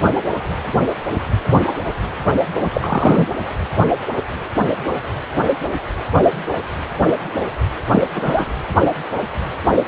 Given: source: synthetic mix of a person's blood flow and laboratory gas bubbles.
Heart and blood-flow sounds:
Doppler ultrasound of blood flow; precordium
2.60-3.27 s: bubbles
7.91-8.04 s: bubbles
8.15-8.53 s: bubbles
From the record:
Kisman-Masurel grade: 223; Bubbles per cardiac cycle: several, 3 to 8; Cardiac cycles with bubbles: 10 to 50%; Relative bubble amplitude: loud (0.450 to 0.775); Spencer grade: 2 (many but less than half of the cardiac periods contain bubble signals, singularly or in groups); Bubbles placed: anywhere in the cardiac cycle

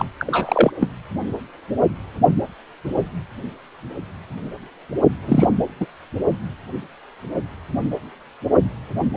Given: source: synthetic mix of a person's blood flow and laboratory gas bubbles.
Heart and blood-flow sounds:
Doppler ultrasound of blood flow; precordium
0.00-0.05 s: bubbles
0.18-0.71 s: bubbles
0.80-0.88 s: bubbles
5.25-5.49 s: bubbles
5.80-5.86 s: bubbles
From the record:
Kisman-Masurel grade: 223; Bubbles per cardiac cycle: several, 3 to 8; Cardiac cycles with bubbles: 10 to 50%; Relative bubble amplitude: loud (0.450 to 0.775); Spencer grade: 2 (many but less than half of the cardiac periods contain bubble signals, singularly or in groups); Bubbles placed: only in the low amplitude regions of the cardiac cycle

